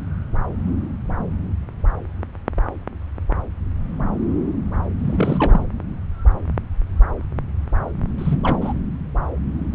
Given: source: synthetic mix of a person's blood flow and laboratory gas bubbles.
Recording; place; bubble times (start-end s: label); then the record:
Doppler ultrasound of blood flow; subclavian vein
5.00-5.64 s: bubbles
8.18-8.57 s: bubbles
8.61-8.73 s: bubbles
From the record:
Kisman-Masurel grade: 222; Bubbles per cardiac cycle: several, 3 to 8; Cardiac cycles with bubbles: 10 to 50%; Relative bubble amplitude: moderate (0.250 to 0.450); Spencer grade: 2 (many but less than half of the cardiac periods contain bubble signals, singularly or in groups); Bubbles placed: anywhere in the cardiac cycle